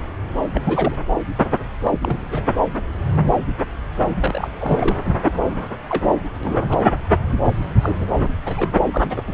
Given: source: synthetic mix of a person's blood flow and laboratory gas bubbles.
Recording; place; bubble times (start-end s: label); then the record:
Doppler ultrasound of blood flow; subclavian vein
0.54-0.61 s: bubbles
0.65-0.95 s: bubbles
1.83-1.99 s: bubbles
2.01-2.42 s: bubbles
4.16-4.51 s: bubbles
4.60-4.96 s: bubbles
5.23-5.60 s: bubbles
5.89-6.04 s: bubbles
6.43-6.77 s: bubbles
7.45-7.54 s: bubbles
7.81-8.05 s: bubbles
8.20-8.29 s: bubbles
8.45-8.70 s: bubbles
8.91-9.22 s: bubbles
9.27-9.34 s: bubbles
From the record:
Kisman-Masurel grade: 232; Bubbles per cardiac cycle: several, 3 to 8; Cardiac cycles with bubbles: 50 to 99%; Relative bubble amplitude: moderate (0.250 to 0.450); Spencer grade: 3 (all of the cardiac periods contain showers or single bubble signals, but not dominating or overriding the cardiac motion signals); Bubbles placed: anywhere in the cardiac cycle